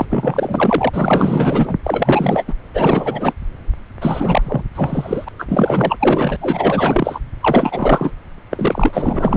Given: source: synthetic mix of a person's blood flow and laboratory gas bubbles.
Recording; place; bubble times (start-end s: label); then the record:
Doppler ultrasound of blood flow; subclavian vein
0.00-0.05 s: bubbles
0.10-0.89 s: bubbles
0.92-1.77 s: bubbles
1.83-2.54 s: bubbles
2.74-3.33 s: bubbles
4.01-4.62 s: bubbles
4.75-5.29 s: bubbles
5.38-5.46 s: bubbles
5.49-6.37 s: bubbles
6.41-7.20 s: bubbles
7.40-8.11 s: bubbles
8.50-9.37 s: bubbles
From the record:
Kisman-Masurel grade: 444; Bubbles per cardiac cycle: continuous sound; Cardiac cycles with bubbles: 100%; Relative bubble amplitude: maximal (0.775 to 0.999); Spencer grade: 4 (maximum detectable bubble signal sounding continuously throughout systole and diastole of every cardiac period, and overriding the amplitude of the normal cardiac signals); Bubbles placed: anywhere in the cardiac cycle